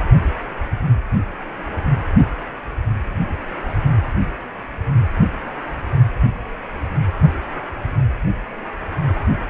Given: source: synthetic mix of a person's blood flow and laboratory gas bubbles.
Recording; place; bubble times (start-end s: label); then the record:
Doppler ultrasound of blood flow; precordium
7.21-7.29 s: bubbles
From the record:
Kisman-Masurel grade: 112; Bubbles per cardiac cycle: 1 to 2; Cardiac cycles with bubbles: 1 to 10%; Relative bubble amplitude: moderate (0.250 to 0.450); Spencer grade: 1 (occasional bubble signal discernible with the cardiac motion signal, with majority of cardiac periods free of bubbles); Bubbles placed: anywhere in the cardiac cycle